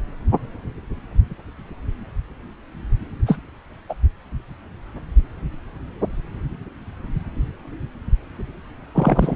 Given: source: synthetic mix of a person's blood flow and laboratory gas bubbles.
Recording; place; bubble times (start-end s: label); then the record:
Doppler ultrasound of blood flow; subclavian vein
3.26-3.37 s: bubbles
3.89-3.94 s: bubbles
8.94-9.36 s: bubbles
From the record:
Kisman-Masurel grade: 123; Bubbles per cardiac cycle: 1 to 2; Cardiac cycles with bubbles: 10 to 50%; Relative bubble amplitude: loud (0.450 to 0.775); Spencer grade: 2 (many but less than half of the cardiac periods contain bubble signals, singularly or in groups); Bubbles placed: anywhere in the cardiac cycle